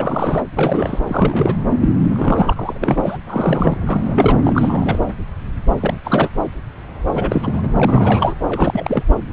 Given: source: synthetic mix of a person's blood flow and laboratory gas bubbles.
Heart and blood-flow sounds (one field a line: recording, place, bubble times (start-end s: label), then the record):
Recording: Doppler ultrasound of blood flow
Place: subclavian vein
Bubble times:
0.00-0.42 s: bubbles
0.55-0.99 s: bubbles
1.08-1.56 s: bubbles
1.81-1.90 s: bubbles
2.10-2.54 s: bubbles
2.56-3.17 s: bubbles
3.27-3.77 s: bubbles
3.86-4.38 s: bubbles
4.45-5.00 s: bubbles
5.80-5.97 s: bubbles
6.04-6.29 s: bubbles
7.12-7.67 s: bubbles
7.75-8.35 s: bubbles
8.47-9.03 s: bubbles
From the record:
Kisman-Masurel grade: 332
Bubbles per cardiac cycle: rolling drumbeat, 9 or more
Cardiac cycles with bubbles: 50 to 99%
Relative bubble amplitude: moderate (0.250 to 0.450)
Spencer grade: 3 (all of the cardiac periods contain showers or single bubble signals, but not dominating or overriding the cardiac motion signals)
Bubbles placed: anywhere in the cardiac cycle